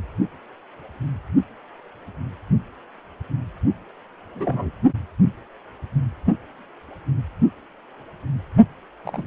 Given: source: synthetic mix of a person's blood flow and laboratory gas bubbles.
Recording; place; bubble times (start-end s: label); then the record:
Doppler ultrasound of blood flow; precordium
4.35-4.71 s: bubbles
9.05-9.26 s: bubbles
From the record:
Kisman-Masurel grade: 121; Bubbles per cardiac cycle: 1 to 2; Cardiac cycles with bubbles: 10 to 50%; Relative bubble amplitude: barely perceptible (0.100 to 0.250); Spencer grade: 2 (many but less than half of the cardiac periods contain bubble signals, singularly or in groups); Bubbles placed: only in the low amplitude regions of the cardiac cycle